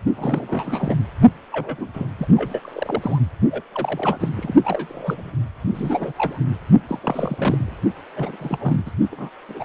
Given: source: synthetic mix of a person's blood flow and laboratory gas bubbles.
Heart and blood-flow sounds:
Doppler ultrasound of blood flow; precordium
0.17-0.98 s: bubbles
1.52-1.88 s: bubbles
1.93-2.08 s: bubbles
2.18-2.28 s: bubbles
2.34-3.18 s: bubbles
3.50-3.62 s: bubbles
3.75-4.29 s: bubbles
4.37-4.53 s: bubbles
4.64-5.31 s: bubbles
5.68-6.12 s: bubbles
6.17-6.39 s: bubbles
6.88-7.76 s: bubbles
8.15-8.37 s: bubbles
8.39-8.91 s: bubbles
9.12-9.29 s: bubbles
9.48-9.65 s: bubbles
From the record:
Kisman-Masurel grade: 342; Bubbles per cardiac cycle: rolling drumbeat, 9 or more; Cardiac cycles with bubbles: 100%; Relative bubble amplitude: moderate (0.250 to 0.450); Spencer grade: 3 (all of the cardiac periods contain showers or single bubble signals, but not dominating or overriding the cardiac motion signals); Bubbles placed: only in the low amplitude regions of the cardiac cycle

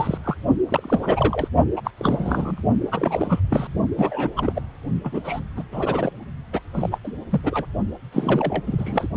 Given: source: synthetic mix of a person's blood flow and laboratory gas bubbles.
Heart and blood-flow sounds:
Doppler ultrasound of blood flow; precordium
0.00-0.17 s: bubbles
0.24-0.36 s: bubbles
0.69-1.48 s: bubbles
1.76-1.81 s: bubbles
1.84-1.91 s: bubbles
1.98-2.63 s: bubbles
2.92-3.40 s: bubbles
3.50-3.73 s: bubbles
3.97-4.29 s: bubbles
4.36-4.62 s: bubbles
5.04-5.21 s: bubbles
5.24-5.40 s: bubbles
5.57-5.63 s: bubbles
5.72-6.12 s: bubbles
6.53-6.59 s: bubbles
6.74-6.99 s: bubbles
7.04-7.12 s: bubbles
7.30-7.41 s: bubbles
7.43-7.66 s: bubbles
8.12-8.62 s: bubbles
8.66-9.07 s: bubbles
From the record:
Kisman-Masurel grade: 342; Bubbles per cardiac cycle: rolling drumbeat, 9 or more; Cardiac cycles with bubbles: 100%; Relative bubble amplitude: moderate (0.250 to 0.450); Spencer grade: 3 (all of the cardiac periods contain showers or single bubble signals, but not dominating or overriding the cardiac motion signals); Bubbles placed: only in the low amplitude regions of the cardiac cycle

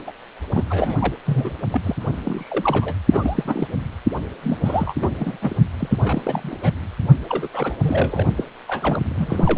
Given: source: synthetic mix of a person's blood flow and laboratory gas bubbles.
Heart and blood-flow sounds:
Doppler ultrasound of blood flow; precordium
0.06-0.12 s: bubbles
0.54-0.64 s: bubbles
0.70-0.98 s: bubbles
1.00-1.14 s: bubbles
1.26-1.57 s: bubbles
1.72-1.95 s: bubbles
2.00-2.93 s: bubbles
3.11-3.67 s: bubbles
4.42-4.58 s: bubbles
4.64-4.94 s: bubbles
5.00-5.38 s: bubbles
5.42-5.56 s: bubbles
5.79-6.58 s: bubbles
6.62-6.71 s: bubbles
7.29-7.48 s: bubbles
7.54-7.78 s: bubbles
7.83-8.26 s: bubbles
8.37-8.44 s: bubbles
8.67-9.58 s: bubbles
From the record:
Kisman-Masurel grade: 342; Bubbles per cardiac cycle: rolling drumbeat, 9 or more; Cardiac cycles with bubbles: 100%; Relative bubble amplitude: moderate (0.250 to 0.450); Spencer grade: 3 (all of the cardiac periods contain showers or single bubble signals, but not dominating or overriding the cardiac motion signals); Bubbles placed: only in the low amplitude regions of the cardiac cycle

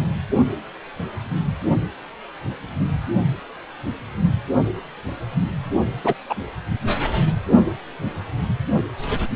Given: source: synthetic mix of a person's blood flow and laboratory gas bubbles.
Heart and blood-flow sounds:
Doppler ultrasound of blood flow; precordium
6.04-6.13 s: bubbles
6.29-6.35 s: bubbles
From the record:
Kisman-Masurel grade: 123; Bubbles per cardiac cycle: 1 to 2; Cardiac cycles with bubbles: 10 to 50%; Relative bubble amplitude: loud (0.450 to 0.775); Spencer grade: 2 (many but less than half of the cardiac periods contain bubble signals, singularly or in groups); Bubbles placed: only in the low amplitude regions of the cardiac cycle

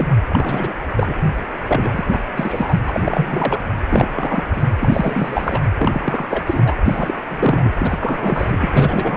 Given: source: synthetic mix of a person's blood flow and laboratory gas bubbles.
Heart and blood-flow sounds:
Doppler ultrasound of blood flow; precordium
0.00-0.07 s: bubbles
0.28-0.73 s: bubbles
0.95-1.15 s: bubbles
1.68-2.20 s: bubbles
2.35-2.79 s: bubbles
2.86-3.60 s: bubbles
3.89-4.07 s: bubbles
4.13-4.44 s: bubbles
4.52-4.76 s: bubbles
4.80-5.60 s: bubbles
5.78-6.74 s: bubbles
6.84-7.14 s: bubbles
7.24-7.70 s: bubbles
7.75-8.67 s: bubbles
8.73-9.17 s: bubbles
From the record:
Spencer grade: 3 (all of the cardiac periods contain showers or single bubble signals, but not dominating or overriding the cardiac motion signals); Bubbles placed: anywhere in the cardiac cycle

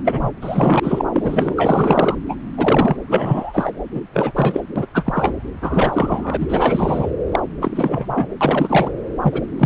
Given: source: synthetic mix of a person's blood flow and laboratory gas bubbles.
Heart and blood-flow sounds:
Doppler ultrasound of blood flow; subclavian vein
0.05-0.32 s: bubbles
0.41-0.80 s: bubbles
0.82-1.05 s: bubbles
1.13-2.15 s: bubbles
2.28-2.35 s: bubbles
2.57-2.96 s: bubbles
3.08-3.72 s: bubbles
3.94-4.00 s: bubbles
4.13-4.32 s: bubbles
4.35-4.60 s: bubbles
4.75-4.85 s: bubbles
4.94-5.34 s: bubbles
5.62-7.12 s: bubbles
7.31-7.39 s: bubbles
7.60-8.28 s: bubbles
8.41-8.91 s: bubbles
9.23-9.42 s: bubbles
9.58-9.66 s: bubbles
From the record:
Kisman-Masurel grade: 332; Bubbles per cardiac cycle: rolling drumbeat, 9 or more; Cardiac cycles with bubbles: 50 to 99%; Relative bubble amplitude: moderate (0.250 to 0.450); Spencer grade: 3 (all of the cardiac periods contain showers or single bubble signals, but not dominating or overriding the cardiac motion signals); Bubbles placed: anywhere in the cardiac cycle

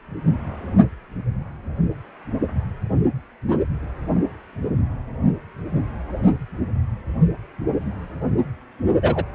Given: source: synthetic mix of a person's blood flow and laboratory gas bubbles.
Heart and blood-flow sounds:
Doppler ultrasound of blood flow; precordium
9.01-9.23 s: bubbles
From the record:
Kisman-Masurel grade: 113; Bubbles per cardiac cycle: 1 to 2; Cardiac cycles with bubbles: 1 to 10%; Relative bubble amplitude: loud (0.450 to 0.775); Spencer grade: 1 (occasional bubble signal discernible with the cardiac motion signal, with majority of cardiac periods free of bubbles); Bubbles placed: anywhere in the cardiac cycle

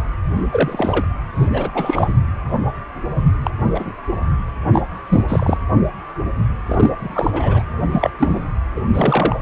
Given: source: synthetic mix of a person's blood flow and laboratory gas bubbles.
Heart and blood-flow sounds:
Doppler ultrasound of blood flow; precordium
0.51-1.05 s: bubbles
1.35-1.49 s: bubbles
1.53-1.69 s: bubbles
1.75-2.13 s: bubbles
3.43-3.50 s: bubbles
3.74-3.92 s: bubbles
4.72-4.83 s: bubbles
5.08-5.25 s: bubbles
5.28-5.57 s: bubbles
6.66-6.94 s: bubbles
6.99-7.62 s: bubbles
7.91-8.10 s: bubbles
8.19-8.40 s: bubbles
8.76-8.81 s: bubbles
8.93-9.36 s: bubbles
From the record:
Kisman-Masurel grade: 233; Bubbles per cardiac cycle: several, 3 to 8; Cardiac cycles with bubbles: 50 to 99%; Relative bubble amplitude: loud (0.450 to 0.775); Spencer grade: 3 (all of the cardiac periods contain showers or single bubble signals, but not dominating or overriding the cardiac motion signals); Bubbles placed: anywhere in the cardiac cycle

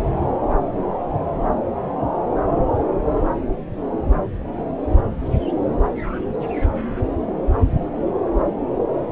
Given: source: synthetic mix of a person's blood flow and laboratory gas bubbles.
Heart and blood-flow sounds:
Doppler ultrasound of blood flow; subclavian vein
no bubbles
From the record:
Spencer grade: 0 (complete lack of bubble signals)

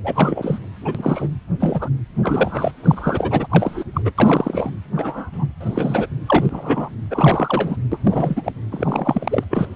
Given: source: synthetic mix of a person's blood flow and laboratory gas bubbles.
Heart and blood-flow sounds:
Doppler ultrasound of blood flow; precordium
0.03-0.59 s: bubbles
0.84-1.29 s: bubbles
1.60-1.89 s: bubbles
2.23-2.72 s: bubbles
2.83-3.47 s: bubbles
3.50-3.83 s: bubbles
3.94-4.02 s: bubbles
4.04-4.10 s: bubbles
4.17-4.71 s: bubbles
4.96-5.46 s: bubbles
5.60-6.06 s: bubbles
6.26-6.89 s: bubbles
7.10-7.76 s: bubbles
7.91-7.99 s: bubbles
8.04-8.52 s: bubbles
8.71-9.44 s: bubbles
9.50-9.67 s: bubbles
From the record:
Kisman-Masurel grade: 242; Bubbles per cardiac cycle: several, 3 to 8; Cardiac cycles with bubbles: 100%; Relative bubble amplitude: moderate (0.250 to 0.450); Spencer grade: 3 (all of the cardiac periods contain showers or single bubble signals, but not dominating or overriding the cardiac motion signals); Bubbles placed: anywhere in the cardiac cycle

